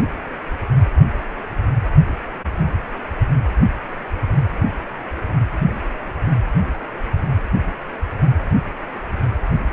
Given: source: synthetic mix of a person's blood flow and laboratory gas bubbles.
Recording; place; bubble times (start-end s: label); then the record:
Doppler ultrasound of blood flow; precordium
no bubbles
From the record:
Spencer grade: 0 (complete lack of bubble signals)